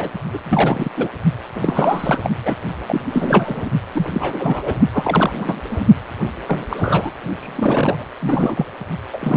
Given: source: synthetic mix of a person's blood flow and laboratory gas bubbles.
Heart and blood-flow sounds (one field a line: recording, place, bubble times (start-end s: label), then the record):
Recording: Doppler ultrasound of blood flow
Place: precordium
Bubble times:
0.00-0.10 s: bubbles
0.33-0.38 s: bubbles
0.45-0.89 s: bubbles
0.97-1.08 s: bubbles
1.55-2.19 s: bubbles
2.23-2.30 s: bubbles
2.44-2.56 s: bubbles
2.86-3.01 s: bubbles
3.08-3.71 s: bubbles
3.93-4.79 s: bubbles
4.93-5.61 s: bubbles
5.70-5.87 s: bubbles
6.46-6.65 s: bubbles
6.70-7.12 s: bubbles
7.41-8.05 s: bubbles
8.21-8.65 s: bubbles
9.12-9.36 s: bubbles
From the record:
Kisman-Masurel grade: 342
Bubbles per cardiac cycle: rolling drumbeat, 9 or more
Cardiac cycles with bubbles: 100%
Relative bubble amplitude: moderate (0.250 to 0.450)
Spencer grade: 3 (all of the cardiac periods contain showers or single bubble signals, but not dominating or overriding the cardiac motion signals)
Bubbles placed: only in the low amplitude regions of the cardiac cycle